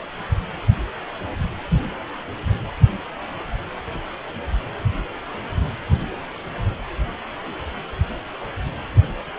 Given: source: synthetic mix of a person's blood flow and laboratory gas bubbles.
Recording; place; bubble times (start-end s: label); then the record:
Doppler ultrasound of blood flow; precordium
no bubbles
From the record:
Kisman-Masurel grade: 000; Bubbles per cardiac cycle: 0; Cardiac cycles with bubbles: 0%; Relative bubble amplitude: no bubbles discernible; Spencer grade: 0 (complete lack of bubble signals)